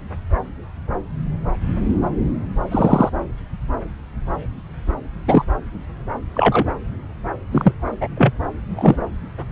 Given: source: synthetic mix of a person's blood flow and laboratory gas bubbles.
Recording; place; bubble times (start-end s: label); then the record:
Doppler ultrasound of blood flow; subclavian vein
2.71-3.09 s: bubbles
5.27-5.45 s: bubbles
6.34-6.73 s: bubbles
7.52-7.72 s: bubbles
8.01-8.08 s: bubbles
8.17-8.33 s: bubbles
8.70-8.96 s: bubbles
From the record:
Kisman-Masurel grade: 123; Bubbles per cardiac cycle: 1 to 2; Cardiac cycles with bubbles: 10 to 50%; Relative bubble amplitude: loud (0.450 to 0.775); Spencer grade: 2 (many but less than half of the cardiac periods contain bubble signals, singularly or in groups); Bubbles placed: anywhere in the cardiac cycle